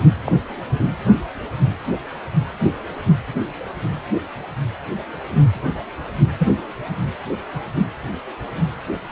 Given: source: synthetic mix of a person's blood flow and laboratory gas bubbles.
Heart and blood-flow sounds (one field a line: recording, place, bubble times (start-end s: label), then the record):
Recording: Doppler ultrasound of blood flow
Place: precordium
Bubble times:
0.26-0.32 s: bubbles
6.38-6.48 s: bubbles
From the record:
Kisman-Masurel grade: 122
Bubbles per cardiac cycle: 1 to 2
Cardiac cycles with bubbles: 10 to 50%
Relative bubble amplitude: moderate (0.250 to 0.450)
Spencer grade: 2 (many but less than half of the cardiac periods contain bubble signals, singularly or in groups)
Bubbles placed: anywhere in the cardiac cycle